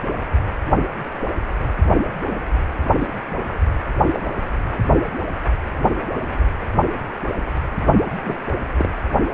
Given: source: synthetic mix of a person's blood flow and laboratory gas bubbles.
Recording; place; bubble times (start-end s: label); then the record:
Doppler ultrasound of blood flow; precordium
2.30-2.40 s: bubbles
2.99-3.07 s: bubbles
3.99-4.08 s: bubbles
4.13-4.22 s: bubbles
8.24-8.36 s: bubbles
8.78-8.91 s: bubbles
From the record:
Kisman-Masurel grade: 122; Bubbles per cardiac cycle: 1 to 2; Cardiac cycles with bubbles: 10 to 50%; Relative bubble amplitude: moderate (0.250 to 0.450); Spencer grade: 2 (many but less than half of the cardiac periods contain bubble signals, singularly or in groups); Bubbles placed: anywhere in the cardiac cycle